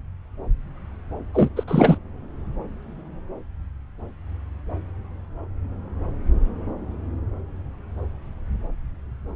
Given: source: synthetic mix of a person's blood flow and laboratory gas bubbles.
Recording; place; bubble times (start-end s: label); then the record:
Doppler ultrasound of blood flow; subclavian vein
1.33-1.49 s: bubbles
1.56-1.64 s: bubbles
1.67-1.98 s: bubbles
From the record:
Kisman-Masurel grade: 213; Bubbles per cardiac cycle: several, 3 to 8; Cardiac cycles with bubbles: 1 to 10%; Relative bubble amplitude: loud (0.450 to 0.775); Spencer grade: 1 (occasional bubble signal discernible with the cardiac motion signal, with majority of cardiac periods free of bubbles); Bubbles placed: anywhere in the cardiac cycle